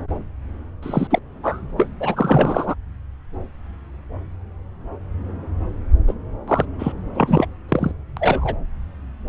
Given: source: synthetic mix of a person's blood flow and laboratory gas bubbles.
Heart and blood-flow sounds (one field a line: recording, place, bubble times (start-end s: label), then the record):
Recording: Doppler ultrasound of blood flow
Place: subclavian vein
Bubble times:
0.83-1.07 s: bubbles
1.10-1.19 s: bubbles
1.43-1.60 s: bubbles
1.77-1.88 s: bubbles
2.00-2.75 s: bubbles
6.08-6.14 s: bubbles
6.48-6.66 s: bubbles
6.79-6.92 s: bubbles
7.14-7.46 s: bubbles
7.69-7.92 s: bubbles
8.17-8.55 s: bubbles
From the record:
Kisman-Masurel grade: 233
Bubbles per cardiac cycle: several, 3 to 8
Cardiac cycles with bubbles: 50 to 99%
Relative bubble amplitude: loud (0.450 to 0.775)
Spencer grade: 3 (all of the cardiac periods contain showers or single bubble signals, but not dominating or overriding the cardiac motion signals)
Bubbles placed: anywhere in the cardiac cycle